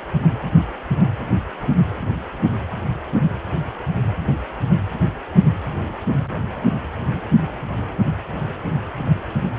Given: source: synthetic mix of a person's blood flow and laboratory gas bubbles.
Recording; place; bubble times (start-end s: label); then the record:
Doppler ultrasound of blood flow; precordium
no bubbles
From the record:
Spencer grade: 0 (complete lack of bubble signals)